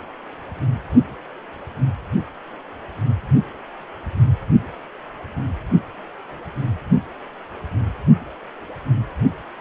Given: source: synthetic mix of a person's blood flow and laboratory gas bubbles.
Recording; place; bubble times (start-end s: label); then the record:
Doppler ultrasound of blood flow; precordium
no bubbles
From the record:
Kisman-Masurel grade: 000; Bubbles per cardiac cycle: 0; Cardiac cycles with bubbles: 0%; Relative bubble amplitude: no bubbles discernible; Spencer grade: 0 (complete lack of bubble signals)